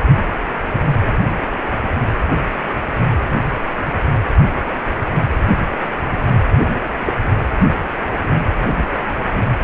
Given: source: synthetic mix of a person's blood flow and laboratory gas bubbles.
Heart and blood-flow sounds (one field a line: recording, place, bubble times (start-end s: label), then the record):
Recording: Doppler ultrasound of blood flow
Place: precordium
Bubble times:
6.66-6.71 s: bubbles
7.06-7.12 s: bubbles
From the record:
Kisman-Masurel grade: 112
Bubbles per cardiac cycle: 1 to 2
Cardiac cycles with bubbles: 1 to 10%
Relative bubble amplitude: moderate (0.250 to 0.450)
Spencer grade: 1 (occasional bubble signal discernible with the cardiac motion signal, with majority of cardiac periods free of bubbles)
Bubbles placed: anywhere in the cardiac cycle